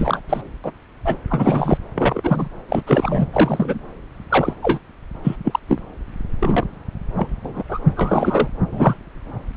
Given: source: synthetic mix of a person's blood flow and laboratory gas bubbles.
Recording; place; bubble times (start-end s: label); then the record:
Doppler ultrasound of blood flow; subclavian vein
0.00-0.20 s: bubbles
0.29-0.41 s: bubbles
0.64-0.71 s: bubbles
1.05-1.16 s: bubbles
1.30-1.78 s: bubbles
1.95-2.48 s: bubbles
2.69-2.83 s: bubbles
2.87-3.27 s: bubbles
3.33-3.79 s: bubbles
4.30-4.54 s: bubbles
4.62-4.79 s: bubbles
5.24-5.36 s: bubbles
5.44-5.59 s: bubbles
5.68-5.79 s: bubbles
6.39-6.67 s: bubbles
7.17-7.28 s: bubbles
7.45-7.63 s: bubbles
7.69-7.79 s: bubbles
7.96-8.48 s: bubbles
8.72-8.96 s: bubbles
From the record:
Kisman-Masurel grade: 243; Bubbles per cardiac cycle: several, 3 to 8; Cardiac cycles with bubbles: 100%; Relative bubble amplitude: loud (0.450 to 0.775); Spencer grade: 3 (all of the cardiac periods contain showers or single bubble signals, but not dominating or overriding the cardiac motion signals); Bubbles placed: anywhere in the cardiac cycle